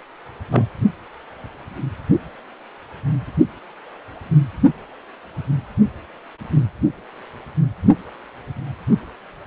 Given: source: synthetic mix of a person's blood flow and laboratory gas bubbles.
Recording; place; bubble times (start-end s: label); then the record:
Doppler ultrasound of blood flow; precordium
0.52-0.65 s: bubbles
From the record:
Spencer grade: 1 (occasional bubble signal discernible with the cardiac motion signal, with majority of cardiac periods free of bubbles); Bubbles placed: only in the low amplitude regions of the cardiac cycle